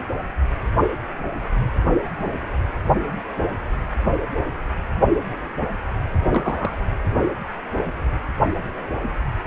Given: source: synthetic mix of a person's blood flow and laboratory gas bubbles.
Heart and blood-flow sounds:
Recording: Doppler ultrasound of blood flow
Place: precordium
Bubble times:
6.30-6.76 s: bubbles
From the record:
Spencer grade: 1 (occasional bubble signal discernible with the cardiac motion signal, with majority of cardiac periods free of bubbles)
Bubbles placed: anywhere in the cardiac cycle

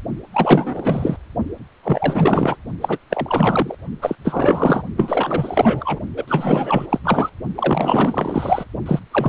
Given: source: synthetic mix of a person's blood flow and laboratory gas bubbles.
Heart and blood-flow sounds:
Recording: Doppler ultrasound of blood flow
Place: precordium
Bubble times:
0.33-1.17 s: bubbles
1.83-2.56 s: bubbles
2.80-2.98 s: bubbles
3.10-3.75 s: bubbles
4.01-4.16 s: bubbles
4.24-4.83 s: bubbles
4.96-5.99 s: bubbles
6.16-6.87 s: bubbles
6.89-6.99 s: bubbles
7.04-7.29 s: bubbles
7.54-8.64 s: bubbles
8.86-8.99 s: bubbles
9.11-9.29 s: bubbles
From the record:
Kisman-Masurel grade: 444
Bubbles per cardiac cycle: continuous sound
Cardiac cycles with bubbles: 100%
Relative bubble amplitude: maximal (0.775 to 0.999)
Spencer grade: 4 (maximum detectable bubble signal sounding continuously throughout systole and diastole of every cardiac period, and overriding the amplitude of the normal cardiac signals)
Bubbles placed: only in the low amplitude regions of the cardiac cycle

